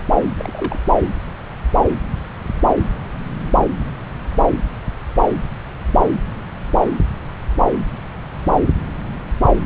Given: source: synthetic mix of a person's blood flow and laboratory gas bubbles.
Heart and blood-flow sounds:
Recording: Doppler ultrasound of blood flow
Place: subclavian vein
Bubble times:
0.37-0.79 s: bubbles
From the record:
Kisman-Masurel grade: 112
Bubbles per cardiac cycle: 1 to 2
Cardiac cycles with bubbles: 1 to 10%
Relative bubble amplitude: moderate (0.250 to 0.450)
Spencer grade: 1 (occasional bubble signal discernible with the cardiac motion signal, with majority of cardiac periods free of bubbles)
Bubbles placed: anywhere in the cardiac cycle

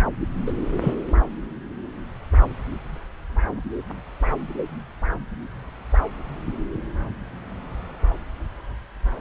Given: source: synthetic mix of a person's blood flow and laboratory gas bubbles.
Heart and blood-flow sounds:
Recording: Doppler ultrasound of blood flow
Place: subclavian vein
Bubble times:
0.46-0.52 s: bubbles
0.81-0.94 s: bubbles
From the record:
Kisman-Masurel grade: 112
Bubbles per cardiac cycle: 1 to 2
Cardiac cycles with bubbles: 1 to 10%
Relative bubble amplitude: moderate (0.250 to 0.450)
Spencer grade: 1 (occasional bubble signal discernible with the cardiac motion signal, with majority of cardiac periods free of bubbles)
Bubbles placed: anywhere in the cardiac cycle

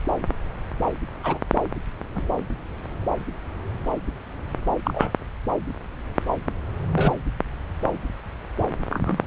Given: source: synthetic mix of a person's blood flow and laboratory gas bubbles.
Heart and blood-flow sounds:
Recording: Doppler ultrasound of blood flow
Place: subclavian vein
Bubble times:
1.23-1.39 s: bubbles
2.14-2.23 s: bubbles
4.84-5.12 s: bubbles
6.95-7.13 s: bubbles
8.90-9.24 s: bubbles
From the record:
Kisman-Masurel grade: 122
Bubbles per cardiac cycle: 1 to 2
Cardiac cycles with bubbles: 10 to 50%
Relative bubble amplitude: moderate (0.250 to 0.450)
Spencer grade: 2 (many but less than half of the cardiac periods contain bubble signals, singularly or in groups)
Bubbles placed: anywhere in the cardiac cycle

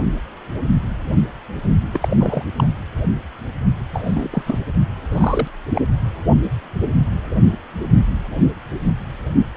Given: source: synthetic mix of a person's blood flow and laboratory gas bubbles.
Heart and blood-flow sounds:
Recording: Doppler ultrasound of blood flow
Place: precordium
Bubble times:
1.94-2.44 s: bubbles
2.56-2.66 s: bubbles
3.93-4.43 s: bubbles
4.46-4.60 s: bubbles
5.11-5.48 s: bubbles
5.75-5.82 s: bubbles
From the record:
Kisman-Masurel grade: 222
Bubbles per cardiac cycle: several, 3 to 8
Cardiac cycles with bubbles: 10 to 50%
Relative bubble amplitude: moderate (0.250 to 0.450)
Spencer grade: 2 (many but less than half of the cardiac periods contain bubble signals, singularly or in groups)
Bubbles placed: anywhere in the cardiac cycle

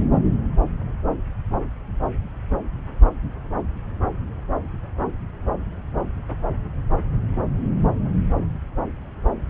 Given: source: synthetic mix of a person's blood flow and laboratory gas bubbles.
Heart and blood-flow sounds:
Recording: Doppler ultrasound of blood flow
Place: subclavian vein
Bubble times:
no bubbles
From the record:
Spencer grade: 0 (complete lack of bubble signals)

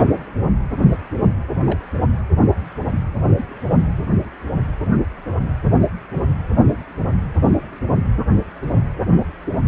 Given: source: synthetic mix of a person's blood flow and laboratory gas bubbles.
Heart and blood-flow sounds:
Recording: Doppler ultrasound of blood flow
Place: precordium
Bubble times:
0.00-0.17 s: bubbles
1.66-1.79 s: bubbles
3.37-3.44 s: bubbles
From the record:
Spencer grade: 2 (many but less than half of the cardiac periods contain bubble signals, singularly or in groups)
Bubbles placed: anywhere in the cardiac cycle

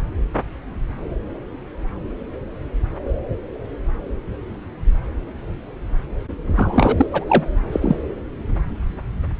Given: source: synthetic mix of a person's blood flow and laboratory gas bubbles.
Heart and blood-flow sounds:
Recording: Doppler ultrasound of blood flow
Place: subclavian vein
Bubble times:
6.55-7.07 s: bubbles
7.12-7.25 s: bubbles
7.28-7.43 s: bubbles
7.72-7.96 s: bubbles
From the record:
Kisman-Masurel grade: 213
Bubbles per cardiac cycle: several, 3 to 8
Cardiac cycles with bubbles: 1 to 10%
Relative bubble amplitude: loud (0.450 to 0.775)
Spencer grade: 1 (occasional bubble signal discernible with the cardiac motion signal, with majority of cardiac periods free of bubbles)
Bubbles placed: anywhere in the cardiac cycle

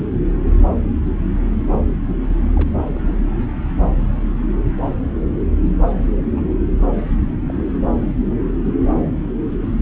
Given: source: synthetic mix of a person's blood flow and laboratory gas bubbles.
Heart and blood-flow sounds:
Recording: Doppler ultrasound of blood flow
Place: subclavian vein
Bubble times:
2.55-2.74 s: bubbles
2.88-2.99 s: bubbles
6.13-6.29 s: bubbles
6.37-6.41 s: bubbles
7.47-7.71 s: bubbles
From the record:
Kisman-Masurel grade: 121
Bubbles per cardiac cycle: 1 to 2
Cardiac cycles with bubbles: 10 to 50%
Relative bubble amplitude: barely perceptible (0.100 to 0.250)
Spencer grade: 2 (many but less than half of the cardiac periods contain bubble signals, singularly or in groups)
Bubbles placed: anywhere in the cardiac cycle

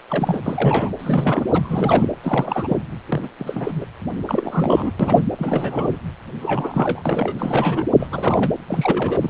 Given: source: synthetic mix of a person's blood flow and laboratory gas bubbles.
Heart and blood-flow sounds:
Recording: Doppler ultrasound of blood flow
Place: precordium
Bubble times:
0.09-0.91 s: bubbles
0.99-1.45 s: bubbles
1.53-2.09 s: bubbles
2.22-2.77 s: bubbles
3.08-3.29 s: bubbles
3.38-3.85 s: bubbles
4.25-4.92 s: bubbles
5.00-5.21 s: bubbles
5.39-5.89 s: bubbles
5.92-5.98 s: bubbles
6.40-7.03 s: bubbles
7.05-7.34 s: bubbles
7.39-7.84 s: bubbles
7.99-8.07 s: bubbles
8.12-8.51 s: bubbles
8.67-9.30 s: bubbles
From the record:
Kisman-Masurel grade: 342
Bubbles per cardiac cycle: rolling drumbeat, 9 or more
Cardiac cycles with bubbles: 100%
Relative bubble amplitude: moderate (0.250 to 0.450)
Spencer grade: 3 (all of the cardiac periods contain showers or single bubble signals, but not dominating or overriding the cardiac motion signals)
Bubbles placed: anywhere in the cardiac cycle

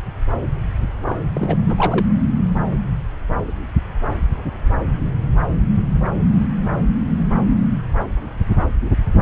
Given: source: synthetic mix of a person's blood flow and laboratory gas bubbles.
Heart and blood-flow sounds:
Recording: Doppler ultrasound of blood flow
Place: subclavian vein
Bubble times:
1.05-1.20 s: bubbles
1.34-1.56 s: bubbles
1.67-2.06 s: bubbles
From the record:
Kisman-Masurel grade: 212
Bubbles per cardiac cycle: several, 3 to 8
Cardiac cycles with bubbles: 1 to 10%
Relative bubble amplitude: moderate (0.250 to 0.450)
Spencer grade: 1 (occasional bubble signal discernible with the cardiac motion signal, with majority of cardiac periods free of bubbles)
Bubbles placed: anywhere in the cardiac cycle

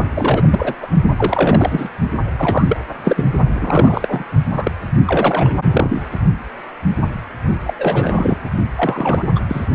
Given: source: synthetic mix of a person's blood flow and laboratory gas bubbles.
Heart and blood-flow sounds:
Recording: Doppler ultrasound of blood flow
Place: precordium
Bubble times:
0.15-0.42 s: bubbles
0.50-0.75 s: bubbles
0.82-0.86 s: bubbles
1.18-1.90 s: bubbles
2.36-2.65 s: bubbles
2.69-2.77 s: bubbles
3.04-3.25 s: bubbles
3.54-4.24 s: bubbles
4.48-4.71 s: bubbles
5.05-5.55 s: bubbles
5.71-6.03 s: bubbles
7.66-7.74 s: bubbles
7.78-8.38 s: bubbles
8.75-9.25 s: bubbles
9.35-9.41 s: bubbles
9.48-9.65 s: bubbles
From the record:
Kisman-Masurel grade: 333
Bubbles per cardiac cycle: rolling drumbeat, 9 or more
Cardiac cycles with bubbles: 50 to 99%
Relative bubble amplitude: loud (0.450 to 0.775)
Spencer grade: 3 (all of the cardiac periods contain showers or single bubble signals, but not dominating or overriding the cardiac motion signals)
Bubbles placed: only in the low amplitude regions of the cardiac cycle

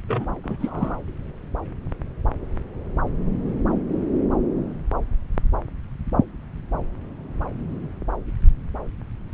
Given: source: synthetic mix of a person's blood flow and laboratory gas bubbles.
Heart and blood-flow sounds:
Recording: Doppler ultrasound of blood flow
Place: subclavian vein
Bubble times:
0.07-0.33 s: bubbles
0.44-0.99 s: bubbles
From the record:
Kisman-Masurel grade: 212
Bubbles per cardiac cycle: several, 3 to 8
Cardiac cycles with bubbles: 1 to 10%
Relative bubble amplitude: moderate (0.250 to 0.450)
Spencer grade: 1 (occasional bubble signal discernible with the cardiac motion signal, with majority of cardiac periods free of bubbles)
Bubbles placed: anywhere in the cardiac cycle

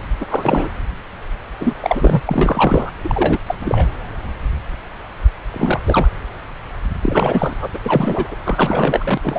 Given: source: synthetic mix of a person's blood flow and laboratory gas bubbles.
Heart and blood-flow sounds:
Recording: Doppler ultrasound of blood flow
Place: subclavian vein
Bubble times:
0.21-0.26 s: bubbles
0.29-0.70 s: bubbles
1.60-1.74 s: bubbles
1.81-2.22 s: bubbles
2.27-2.91 s: bubbles
3.04-3.39 s: bubbles
3.46-3.55 s: bubbles
3.59-3.86 s: bubbles
5.53-5.80 s: bubbles
5.86-6.08 s: bubbles
7.01-7.68 s: bubbles
7.73-8.35 s: bubbles
8.45-9.18 s: bubbles
9.23-9.39 s: bubbles
From the record:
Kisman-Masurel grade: 333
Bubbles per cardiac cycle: rolling drumbeat, 9 or more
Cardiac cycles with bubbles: 50 to 99%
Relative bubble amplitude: loud (0.450 to 0.775)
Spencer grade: 3 (all of the cardiac periods contain showers or single bubble signals, but not dominating or overriding the cardiac motion signals)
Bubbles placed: anywhere in the cardiac cycle

